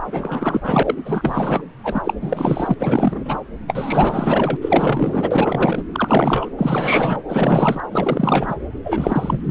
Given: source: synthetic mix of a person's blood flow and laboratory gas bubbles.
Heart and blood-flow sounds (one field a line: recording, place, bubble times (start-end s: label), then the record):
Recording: Doppler ultrasound of blood flow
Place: subclavian vein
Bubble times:
0.05-0.60 s: bubbles
0.63-1.02 s: bubbles
1.05-1.62 s: bubbles
1.83-2.14 s: bubbles
2.20-2.74 s: bubbles
2.79-3.38 s: bubbles
3.67-4.57 s: bubbles
4.61-5.83 s: bubbles
5.92-6.50 s: bubbles
6.58-7.23 s: bubbles
7.29-7.83 s: bubbles
7.92-8.55 s: bubbles
8.84-9.40 s: bubbles
9.44-9.51 s: bubbles
From the record:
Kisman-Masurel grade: 444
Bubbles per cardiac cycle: continuous sound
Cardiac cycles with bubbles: 100%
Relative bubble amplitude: maximal (0.775 to 0.999)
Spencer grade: 4 (maximum detectable bubble signal sounding continuously throughout systole and diastole of every cardiac period, and overriding the amplitude of the normal cardiac signals)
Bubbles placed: anywhere in the cardiac cycle